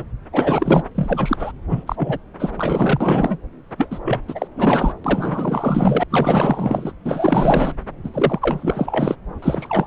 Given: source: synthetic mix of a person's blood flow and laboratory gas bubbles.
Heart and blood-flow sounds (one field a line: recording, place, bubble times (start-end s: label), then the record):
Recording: Doppler ultrasound of blood flow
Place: subclavian vein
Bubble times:
0.00-0.04 s: bubbles
0.33-0.84 s: bubbles
0.94-1.52 s: bubbles
1.69-1.84 s: bubbles
1.86-2.18 s: bubbles
2.40-2.53 s: bubbles
2.57-3.38 s: bubbles
3.77-3.99 s: bubbles
4.04-4.20 s: bubbles
4.28-4.47 s: bubbles
4.56-4.93 s: bubbles
5.04-6.04 s: bubbles
6.10-6.92 s: bubbles
7.04-7.75 s: bubbles
8.04-8.10 s: bubbles
8.13-9.15 s: bubbles
9.42-9.87 s: bubbles
From the record:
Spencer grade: 4 (maximum detectable bubble signal sounding continuously throughout systole and diastole of every cardiac period, and overriding the amplitude of the normal cardiac signals)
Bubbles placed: anywhere in the cardiac cycle